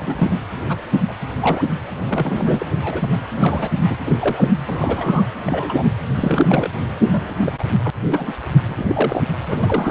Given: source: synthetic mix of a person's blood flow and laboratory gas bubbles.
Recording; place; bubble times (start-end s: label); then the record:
Doppler ultrasound of blood flow; precordium
0.00-0.39 s: bubbles
0.69-0.77 s: bubbles
1.07-1.15 s: bubbles
1.40-1.65 s: bubbles
1.98-2.67 s: bubbles
2.81-3.18 s: bubbles
3.36-3.71 s: bubbles
3.90-3.97 s: bubbles
4.05-4.50 s: bubbles
4.66-5.26 s: bubbles
5.46-5.83 s: bubbles
6.14-6.69 s: bubbles
7.01-7.51 s: bubbles
7.59-7.63 s: bubbles
7.84-7.91 s: bubbles
8.04-8.32 s: bubbles
8.66-9.24 s: bubbles
9.43-9.91 s: bubbles
From the record:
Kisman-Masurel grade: 242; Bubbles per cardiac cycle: several, 3 to 8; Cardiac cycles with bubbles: 100%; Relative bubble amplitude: moderate (0.250 to 0.450); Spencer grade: 3 (all of the cardiac periods contain showers or single bubble signals, but not dominating or overriding the cardiac motion signals); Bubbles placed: anywhere in the cardiac cycle